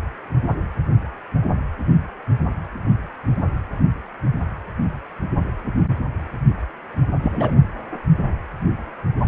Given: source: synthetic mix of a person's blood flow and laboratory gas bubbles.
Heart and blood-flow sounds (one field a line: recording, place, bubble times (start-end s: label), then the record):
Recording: Doppler ultrasound of blood flow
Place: precordium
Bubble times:
7.22-7.54 s: bubbles
From the record:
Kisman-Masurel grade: 223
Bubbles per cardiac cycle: several, 3 to 8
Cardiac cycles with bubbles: 10 to 50%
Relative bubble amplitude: loud (0.450 to 0.775)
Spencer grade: 2 (many but less than half of the cardiac periods contain bubble signals, singularly or in groups)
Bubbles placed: anywhere in the cardiac cycle